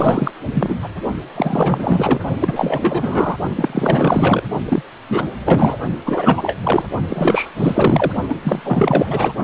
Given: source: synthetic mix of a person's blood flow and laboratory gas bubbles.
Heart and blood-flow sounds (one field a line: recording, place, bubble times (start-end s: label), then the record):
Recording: Doppler ultrasound of blood flow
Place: precordium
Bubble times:
0.00-0.32 s: bubbles
0.54-0.76 s: bubbles
0.82-0.89 s: bubbles
1.35-2.20 s: bubbles
2.40-3.37 s: bubbles
3.56-4.43 s: bubbles
4.65-4.83 s: bubbles
5.08-5.28 s: bubbles
5.46-5.78 s: bubbles
6.05-6.57 s: bubbles
6.63-6.88 s: bubbles
7.08-7.50 s: bubbles
7.56-8.12 s: bubbles
8.29-8.36 s: bubbles
8.44-9.32 s: bubbles
From the record:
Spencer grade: 4 (maximum detectable bubble signal sounding continuously throughout systole and diastole of every cardiac period, and overriding the amplitude of the normal cardiac signals)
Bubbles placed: only in the low amplitude regions of the cardiac cycle